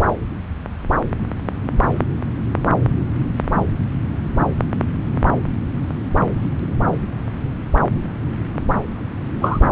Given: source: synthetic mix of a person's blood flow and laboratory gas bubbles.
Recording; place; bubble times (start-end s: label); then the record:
Doppler ultrasound of blood flow; subclavian vein
9.41-9.60 s: bubbles
From the record:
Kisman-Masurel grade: 113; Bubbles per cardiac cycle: 1 to 2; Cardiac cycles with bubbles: 1 to 10%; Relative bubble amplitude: loud (0.450 to 0.775); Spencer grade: 1 (occasional bubble signal discernible with the cardiac motion signal, with majority of cardiac periods free of bubbles); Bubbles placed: anywhere in the cardiac cycle